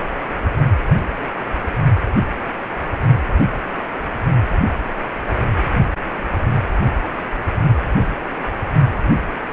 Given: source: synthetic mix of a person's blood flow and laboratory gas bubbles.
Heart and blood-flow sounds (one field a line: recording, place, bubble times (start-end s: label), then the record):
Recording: Doppler ultrasound of blood flow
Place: precordium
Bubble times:
7.89-8.06 s: bubbles
From the record:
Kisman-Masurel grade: 111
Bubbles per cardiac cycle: 1 to 2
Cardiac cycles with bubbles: 1 to 10%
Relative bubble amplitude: barely perceptible (0.100 to 0.250)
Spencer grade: 1 (occasional bubble signal discernible with the cardiac motion signal, with majority of cardiac periods free of bubbles)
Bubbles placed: only in the low amplitude regions of the cardiac cycle